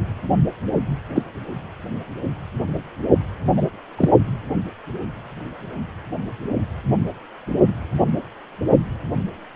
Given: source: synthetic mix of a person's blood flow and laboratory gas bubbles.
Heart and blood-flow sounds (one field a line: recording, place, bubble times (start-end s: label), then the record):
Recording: Doppler ultrasound of blood flow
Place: precordium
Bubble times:
1.15-1.22 s: bubbles
3.56-3.62 s: bubbles
3.98-4.10 s: bubbles
From the record:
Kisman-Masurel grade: 123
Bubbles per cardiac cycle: 1 to 2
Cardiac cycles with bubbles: 10 to 50%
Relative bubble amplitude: loud (0.450 to 0.775)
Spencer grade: 2 (many but less than half of the cardiac periods contain bubble signals, singularly or in groups)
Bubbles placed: only in the low amplitude regions of the cardiac cycle